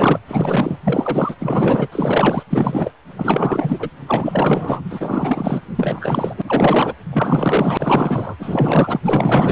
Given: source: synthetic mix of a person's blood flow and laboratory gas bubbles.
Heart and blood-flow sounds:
Doppler ultrasound of blood flow; precordium
0.00-0.20 s: bubbles
0.27-0.77 s: bubbles
0.83-1.35 s: bubbles
1.40-1.88 s: bubbles
1.92-2.43 s: bubbles
2.50-2.92 s: bubbles
3.17-3.90 s: bubbles
4.07-4.85 s: bubbles
4.90-5.62 s: bubbles
5.75-6.34 s: bubbles
6.37-6.42 s: bubbles
6.46-6.94 s: bubbles
7.11-8.36 s: bubbles
8.39-9.00 s: bubbles
9.05-9.52 s: bubbles
From the record:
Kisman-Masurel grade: 444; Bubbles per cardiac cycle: continuous sound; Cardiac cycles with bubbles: 100%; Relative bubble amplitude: maximal (0.775 to 0.999); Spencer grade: 4 (maximum detectable bubble signal sounding continuously throughout systole and diastole of every cardiac period, and overriding the amplitude of the normal cardiac signals); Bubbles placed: anywhere in the cardiac cycle

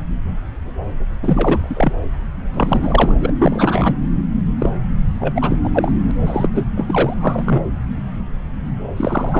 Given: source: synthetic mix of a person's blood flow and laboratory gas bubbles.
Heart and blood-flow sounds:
Doppler ultrasound of blood flow; subclavian vein
1.22-1.93 s: bubbles
2.54-3.15 s: bubbles
3.21-3.32 s: bubbles
3.39-3.94 s: bubbles
4.58-4.70 s: bubbles
5.19-5.57 s: bubbles
5.63-5.69 s: bubbles
5.72-5.92 s: bubbles
6.08-6.11 s: bubbles
6.26-6.48 s: bubbles
6.54-6.67 s: bubbles
6.76-7.14 s: bubbles
7.17-7.61 s: bubbles
8.96-9.40 s: bubbles
From the record:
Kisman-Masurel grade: 332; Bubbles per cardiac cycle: rolling drumbeat, 9 or more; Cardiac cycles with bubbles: 50 to 99%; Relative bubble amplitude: moderate (0.250 to 0.450); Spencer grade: 3 (all of the cardiac periods contain showers or single bubble signals, but not dominating or overriding the cardiac motion signals); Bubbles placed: anywhere in the cardiac cycle

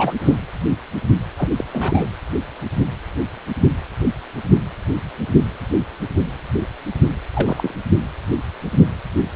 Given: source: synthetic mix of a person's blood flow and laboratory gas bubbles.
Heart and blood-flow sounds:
Doppler ultrasound of blood flow; precordium
0.00-0.13 s: bubbles
0.23-0.35 s: bubbles
1.38-1.50 s: bubbles
1.57-1.65 s: bubbles
1.72-2.10 s: bubbles
7.33-7.74 s: bubbles
From the record:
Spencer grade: 2 (many but less than half of the cardiac periods contain bubble signals, singularly or in groups); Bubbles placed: anywhere in the cardiac cycle

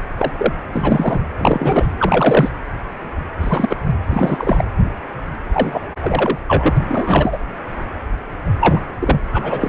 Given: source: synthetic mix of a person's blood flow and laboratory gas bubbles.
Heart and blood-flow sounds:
Doppler ultrasound of blood flow; precordium
0.00-0.02 s: bubbles
0.18-0.32 s: bubbles
0.38-0.53 s: bubbles
0.73-1.21 s: bubbles
1.39-1.87 s: bubbles
1.98-2.49 s: bubbles
3.41-3.76 s: bubbles
4.09-4.64 s: bubbles
5.53-5.79 s: bubbles
6.01-6.39 s: bubbles
6.47-6.74 s: bubbles
6.88-7.38 s: bubbles
8.60-8.81 s: bubbles
9.00-9.20 s: bubbles
9.32-9.69 s: bubbles
From the record:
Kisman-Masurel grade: 233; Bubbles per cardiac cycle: several, 3 to 8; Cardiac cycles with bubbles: 50 to 99%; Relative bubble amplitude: loud (0.450 to 0.775); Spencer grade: 3 (all of the cardiac periods contain showers or single bubble signals, but not dominating or overriding the cardiac motion signals); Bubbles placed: anywhere in the cardiac cycle

